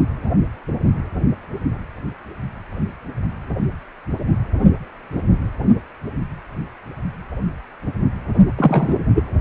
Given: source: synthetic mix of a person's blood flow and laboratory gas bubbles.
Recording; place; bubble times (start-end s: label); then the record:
Doppler ultrasound of blood flow; precordium
8.58-8.98 s: bubbles
9.15-9.23 s: bubbles
From the record:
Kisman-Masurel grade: 123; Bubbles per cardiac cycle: 1 to 2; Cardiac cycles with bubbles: 10 to 50%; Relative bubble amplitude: loud (0.450 to 0.775); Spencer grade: 2 (many but less than half of the cardiac periods contain bubble signals, singularly or in groups); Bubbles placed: only in the low amplitude regions of the cardiac cycle